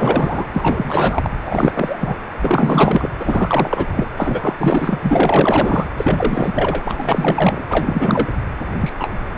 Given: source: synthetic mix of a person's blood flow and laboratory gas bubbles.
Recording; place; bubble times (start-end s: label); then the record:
Doppler ultrasound of blood flow; precordium
0.00-0.46 s: bubbles
0.53-1.30 s: bubbles
1.44-2.16 s: bubbles
2.38-3.08 s: bubbles
3.19-4.07 s: bubbles
4.17-5.00 s: bubbles
5.02-5.86 s: bubbles
5.97-7.64 s: bubbles
7.69-8.30 s: bubbles
8.80-8.92 s: bubbles
8.97-9.10 s: bubbles
9.36-9.38 s: bubbles
From the record:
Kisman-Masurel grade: 444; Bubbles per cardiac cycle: continuous sound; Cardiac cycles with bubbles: 100%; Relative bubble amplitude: maximal (0.775 to 0.999); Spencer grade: 4 (maximum detectable bubble signal sounding continuously throughout systole and diastole of every cardiac period, and overriding the amplitude of the normal cardiac signals); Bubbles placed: anywhere in the cardiac cycle